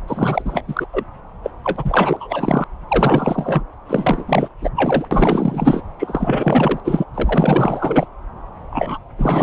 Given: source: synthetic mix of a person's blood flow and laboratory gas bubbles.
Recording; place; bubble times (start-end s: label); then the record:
Doppler ultrasound of blood flow; subclavian vein
0.07-0.42 s: bubbles
0.45-0.64 s: bubbles
0.67-0.86 s: bubbles
0.92-1.04 s: bubbles
1.43-1.51 s: bubbles
1.64-2.64 s: bubbles
2.88-3.63 s: bubbles
3.89-4.50 s: bubbles
4.62-4.70 s: bubbles
4.75-5.05 s: bubbles
5.11-5.82 s: bubbles
5.99-6.80 s: bubbles
6.84-7.04 s: bubbles
7.14-8.06 s: bubbles
8.70-8.97 s: bubbles
9.18-9.43 s: bubbles
From the record:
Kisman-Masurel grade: 444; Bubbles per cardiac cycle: continuous sound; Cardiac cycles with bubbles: 100%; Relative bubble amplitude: maximal (0.775 to 0.999); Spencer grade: 4 (maximum detectable bubble signal sounding continuously throughout systole and diastole of every cardiac period, and overriding the amplitude of the normal cardiac signals); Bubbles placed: anywhere in the cardiac cycle